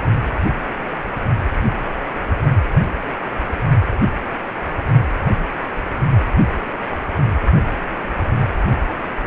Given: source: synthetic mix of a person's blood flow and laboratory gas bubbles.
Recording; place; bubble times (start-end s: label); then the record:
Doppler ultrasound of blood flow; precordium
no bubbles
From the record:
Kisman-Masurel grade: 000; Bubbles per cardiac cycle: 0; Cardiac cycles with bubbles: 0%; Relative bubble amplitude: no bubbles discernible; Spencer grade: 0 (complete lack of bubble signals)